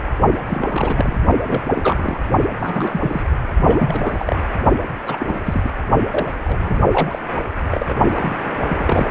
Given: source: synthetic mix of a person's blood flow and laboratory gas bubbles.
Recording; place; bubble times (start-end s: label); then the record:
Doppler ultrasound of blood flow; precordium
0.46-1.19 s: bubbles
1.46-1.61 s: bubbles
1.68-2.21 s: bubbles
2.58-3.24 s: bubbles
3.59-4.36 s: bubbles
5.07-5.39 s: bubbles
5.45-5.71 s: bubbles
5.78-5.83 s: bubbles
6.10-6.31 s: bubbles
6.44-6.79 s: bubbles
6.91-7.19 s: bubbles
7.71-7.86 s: bubbles
7.88-7.94 s: bubbles
8.13-8.58 s: bubbles
8.67-9.11 s: bubbles
From the record:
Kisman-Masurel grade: 342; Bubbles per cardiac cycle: rolling drumbeat, 9 or more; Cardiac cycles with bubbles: 100%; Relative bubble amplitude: moderate (0.250 to 0.450); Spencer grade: 3 (all of the cardiac periods contain showers or single bubble signals, but not dominating or overriding the cardiac motion signals); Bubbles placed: only in the low amplitude regions of the cardiac cycle